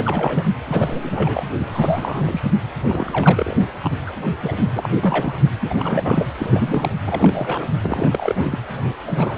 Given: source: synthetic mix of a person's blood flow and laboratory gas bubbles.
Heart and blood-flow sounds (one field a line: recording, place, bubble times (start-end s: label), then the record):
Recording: Doppler ultrasound of blood flow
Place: precordium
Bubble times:
0.00-0.49 s: bubbles
0.68-1.46 s: bubbles
1.59-1.66 s: bubbles
1.73-2.43 s: bubbles
2.87-3.57 s: bubbles
3.78-3.97 s: bubbles
4.06-4.12 s: bubbles
4.41-4.69 s: bubbles
4.75-4.88 s: bubbles
5.03-5.44 s: bubbles
5.61-6.29 s: bubbles
6.38-6.95 s: bubbles
7.04-7.69 s: bubbles
7.82-8.59 s: bubbles
8.84-8.94 s: bubbles
9.06-9.38 s: bubbles
From the record:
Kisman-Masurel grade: 342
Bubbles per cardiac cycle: rolling drumbeat, 9 or more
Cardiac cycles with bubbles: 100%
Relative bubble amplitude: moderate (0.250 to 0.450)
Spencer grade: 3 (all of the cardiac periods contain showers or single bubble signals, but not dominating or overriding the cardiac motion signals)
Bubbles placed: anywhere in the cardiac cycle